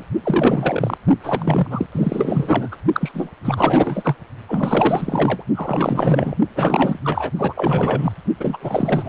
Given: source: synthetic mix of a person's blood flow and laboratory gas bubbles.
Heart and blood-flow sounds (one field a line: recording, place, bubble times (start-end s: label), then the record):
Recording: Doppler ultrasound of blood flow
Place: precordium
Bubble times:
0.00-0.03 s: bubbles
0.23-0.98 s: bubbles
1.23-1.67 s: bubbles
1.70-1.86 s: bubbles
1.92-2.76 s: bubbles
2.92-3.29 s: bubbles
3.45-4.15 s: bubbles
4.47-5.44 s: bubbles
5.55-6.35 s: bubbles
6.55-7.00 s: bubbles
7.02-7.30 s: bubbles
7.37-8.12 s: bubbles
8.40-8.57 s: bubbles
8.60-9.09 s: bubbles
From the record:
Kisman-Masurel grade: 444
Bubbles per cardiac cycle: continuous sound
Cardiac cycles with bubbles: 100%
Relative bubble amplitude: maximal (0.775 to 0.999)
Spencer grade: 4 (maximum detectable bubble signal sounding continuously throughout systole and diastole of every cardiac period, and overriding the amplitude of the normal cardiac signals)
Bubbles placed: only in the low amplitude regions of the cardiac cycle